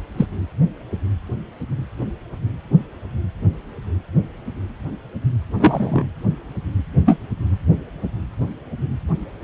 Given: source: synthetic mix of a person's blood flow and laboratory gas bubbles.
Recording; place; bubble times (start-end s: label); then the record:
Doppler ultrasound of blood flow; precordium
0.17-0.26 s: bubbles
5.59-6.04 s: bubbles
7.05-7.20 s: bubbles
From the record:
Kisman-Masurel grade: 123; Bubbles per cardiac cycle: 1 to 2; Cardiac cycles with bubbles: 10 to 50%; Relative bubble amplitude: loud (0.450 to 0.775); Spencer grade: 2 (many but less than half of the cardiac periods contain bubble signals, singularly or in groups); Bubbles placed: anywhere in the cardiac cycle